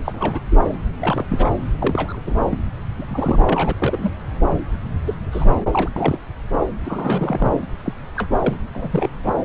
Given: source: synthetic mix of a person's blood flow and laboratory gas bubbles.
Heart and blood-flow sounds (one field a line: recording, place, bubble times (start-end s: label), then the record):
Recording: Doppler ultrasound of blood flow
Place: subclavian vein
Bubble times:
0.05-0.40 s: bubbles
0.51-0.56 s: bubbles
0.99-1.24 s: bubbles
1.29-1.50 s: bubbles
1.78-2.21 s: bubbles
2.26-2.34 s: bubbles
2.50-2.58 s: bubbles
2.98-3.06 s: bubbles
3.09-3.75 s: bubbles
3.79-4.10 s: bubbles
5.05-5.14 s: bubbles
5.32-5.46 s: bubbles
5.71-5.89 s: bubbles
5.96-6.19 s: bubbles
6.85-7.60 s: bubbles
7.84-7.92 s: bubbles
8.17-8.29 s: bubbles
8.39-8.56 s: bubbles
8.74-9.10 s: bubbles
9.24-9.33 s: bubbles
From the record:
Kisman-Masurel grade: 242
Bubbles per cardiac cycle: several, 3 to 8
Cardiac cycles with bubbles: 100%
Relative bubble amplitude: moderate (0.250 to 0.450)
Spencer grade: 3 (all of the cardiac periods contain showers or single bubble signals, but not dominating or overriding the cardiac motion signals)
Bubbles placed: anywhere in the cardiac cycle